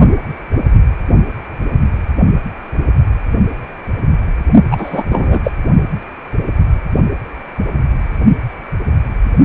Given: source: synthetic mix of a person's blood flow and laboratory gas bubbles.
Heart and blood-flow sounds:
Doppler ultrasound of blood flow; precordium
4.71-5.04 s: bubbles
5.09-5.39 s: bubbles
5.43-5.51 s: bubbles
From the record:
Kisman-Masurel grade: 213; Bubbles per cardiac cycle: several, 3 to 8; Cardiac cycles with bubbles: 1 to 10%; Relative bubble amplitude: loud (0.450 to 0.775); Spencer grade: 1 (occasional bubble signal discernible with the cardiac motion signal, with majority of cardiac periods free of bubbles); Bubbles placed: only in the low amplitude regions of the cardiac cycle

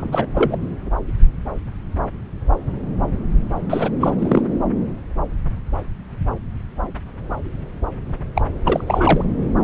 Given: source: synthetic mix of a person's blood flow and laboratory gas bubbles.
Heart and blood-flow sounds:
Doppler ultrasound of blood flow; subclavian vein
0.00-0.26 s: bubbles
0.34-0.57 s: bubbles
3.70-3.90 s: bubbles
4.00-4.11 s: bubbles
4.19-4.42 s: bubbles
8.35-8.41 s: bubbles
8.65-9.24 s: bubbles
From the record:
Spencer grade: 2 (many but less than half of the cardiac periods contain bubble signals, singularly or in groups); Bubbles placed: anywhere in the cardiac cycle

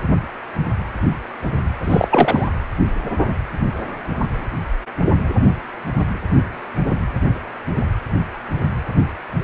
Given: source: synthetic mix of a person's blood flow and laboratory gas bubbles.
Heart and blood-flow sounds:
Doppler ultrasound of blood flow; precordium
1.84-2.08 s: bubbles
2.10-2.47 s: bubbles
From the record:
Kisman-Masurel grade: 213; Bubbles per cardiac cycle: several, 3 to 8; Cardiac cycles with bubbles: 1 to 10%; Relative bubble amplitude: loud (0.450 to 0.775); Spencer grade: 1 (occasional bubble signal discernible with the cardiac motion signal, with majority of cardiac periods free of bubbles); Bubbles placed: anywhere in the cardiac cycle

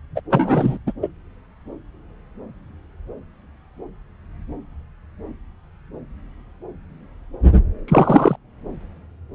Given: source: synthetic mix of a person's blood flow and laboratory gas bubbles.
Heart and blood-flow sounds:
Doppler ultrasound of blood flow; subclavian vein
0.16-0.20 s: bubbles
0.30-0.78 s: bubbles
0.86-0.92 s: bubbles
1.02-1.08 s: bubbles
7.88-8.36 s: bubbles
From the record:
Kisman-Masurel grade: 223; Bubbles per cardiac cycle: several, 3 to 8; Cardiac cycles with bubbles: 10 to 50%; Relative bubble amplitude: loud (0.450 to 0.775); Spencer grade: 2 (many but less than half of the cardiac periods contain bubble signals, singularly or in groups); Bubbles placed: anywhere in the cardiac cycle

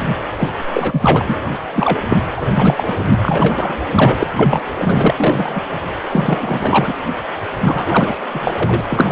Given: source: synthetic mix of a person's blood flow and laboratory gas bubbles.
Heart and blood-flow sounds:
Doppler ultrasound of blood flow; precordium
0.37-0.51 s: bubbles
0.74-1.36 s: bubbles
1.75-1.98 s: bubbles
2.08-2.17 s: bubbles
2.37-2.94 s: bubbles
3.06-3.12 s: bubbles
3.22-3.76 s: bubbles
3.94-4.27 s: bubbles
4.36-4.60 s: bubbles
4.78-5.60 s: bubbles
6.06-6.94 s: bubbles
7.62-8.15 s: bubbles
8.33-8.81 s: bubbles
8.88-9.12 s: bubbles
From the record:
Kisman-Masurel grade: 343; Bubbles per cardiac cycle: rolling drumbeat, 9 or more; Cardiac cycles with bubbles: 100%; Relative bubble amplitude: loud (0.450 to 0.775); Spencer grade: 3 (all of the cardiac periods contain showers or single bubble signals, but not dominating or overriding the cardiac motion signals); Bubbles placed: anywhere in the cardiac cycle

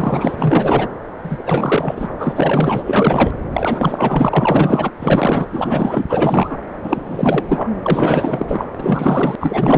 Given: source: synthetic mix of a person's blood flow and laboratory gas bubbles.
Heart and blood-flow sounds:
Doppler ultrasound of blood flow; subclavian vein
0.00-0.88 s: bubbles
1.24-2.08 s: bubbles
2.18-2.33 s: bubbles
2.35-2.82 s: bubbles
2.86-3.35 s: bubbles
3.52-4.90 s: bubbles
5.01-5.48 s: bubbles
5.51-6.06 s: bubbles
6.09-6.57 s: bubbles
6.83-7.02 s: bubbles
7.06-7.71 s: bubbles
7.83-8.68 s: bubbles
8.79-9.35 s: bubbles
9.40-9.78 s: bubbles
From the record:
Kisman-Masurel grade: 444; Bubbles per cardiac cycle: continuous sound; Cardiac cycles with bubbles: 100%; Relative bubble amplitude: maximal (0.775 to 0.999); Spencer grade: 4 (maximum detectable bubble signal sounding continuously throughout systole and diastole of every cardiac period, and overriding the amplitude of the normal cardiac signals); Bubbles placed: anywhere in the cardiac cycle

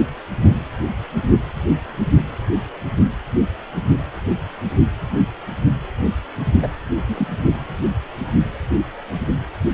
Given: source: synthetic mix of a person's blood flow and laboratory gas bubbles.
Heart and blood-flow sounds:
Doppler ultrasound of blood flow; precordium
6.62-6.68 s: bubbles
7.07-7.27 s: bubbles
From the record:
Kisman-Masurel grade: 113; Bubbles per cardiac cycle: 1 to 2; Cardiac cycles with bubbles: 1 to 10%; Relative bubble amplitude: loud (0.450 to 0.775); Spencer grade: 1 (occasional bubble signal discernible with the cardiac motion signal, with majority of cardiac periods free of bubbles); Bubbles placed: only in the low amplitude regions of the cardiac cycle

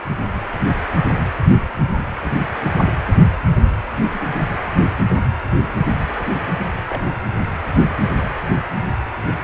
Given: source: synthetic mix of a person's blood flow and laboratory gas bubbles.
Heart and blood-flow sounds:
Doppler ultrasound of blood flow; precordium
4.13-4.19 s: bubbles
6.89-7.04 s: bubbles
From the record:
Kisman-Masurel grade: 111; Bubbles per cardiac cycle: 1 to 2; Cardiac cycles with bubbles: 1 to 10%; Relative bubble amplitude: barely perceptible (0.100 to 0.250); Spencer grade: 1 (occasional bubble signal discernible with the cardiac motion signal, with majority of cardiac periods free of bubbles); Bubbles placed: anywhere in the cardiac cycle

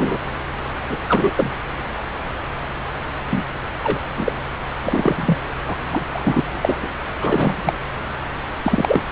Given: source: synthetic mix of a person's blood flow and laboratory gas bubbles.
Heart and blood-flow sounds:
Doppler ultrasound of blood flow; subclavian vein
0.00-0.17 s: bubbles
0.89-0.97 s: bubbles
1.08-1.31 s: bubbles
1.35-1.52 s: bubbles
3.31-3.46 s: bubbles
3.83-4.00 s: bubbles
4.17-4.33 s: bubbles
4.83-5.36 s: bubbles
5.67-5.76 s: bubbles
5.90-6.04 s: bubbles
6.12-6.79 s: bubbles
6.82-6.88 s: bubbles
7.20-7.73 s: bubbles
8.62-9.02 s: bubbles
From the record:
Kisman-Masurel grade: 233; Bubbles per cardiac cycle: several, 3 to 8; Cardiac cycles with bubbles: 50 to 99%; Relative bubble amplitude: loud (0.450 to 0.775); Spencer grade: 3 (all of the cardiac periods contain showers or single bubble signals, but not dominating or overriding the cardiac motion signals); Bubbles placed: anywhere in the cardiac cycle

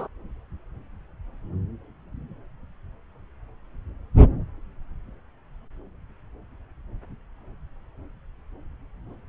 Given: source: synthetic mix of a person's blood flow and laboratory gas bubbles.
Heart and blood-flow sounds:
Doppler ultrasound of blood flow; subclavian vein
0.00-0.08 s: bubbles
From the record:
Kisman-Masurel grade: 213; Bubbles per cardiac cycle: several, 3 to 8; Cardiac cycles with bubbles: 1 to 10%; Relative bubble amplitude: loud (0.450 to 0.775); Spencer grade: 1 (occasional bubble signal discernible with the cardiac motion signal, with majority of cardiac periods free of bubbles); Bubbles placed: anywhere in the cardiac cycle

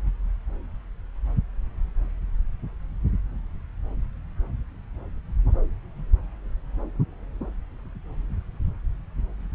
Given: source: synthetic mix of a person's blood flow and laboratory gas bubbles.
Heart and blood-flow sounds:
Doppler ultrasound of blood flow; subclavian vein
no bubbles
From the record:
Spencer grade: 0 (complete lack of bubble signals)

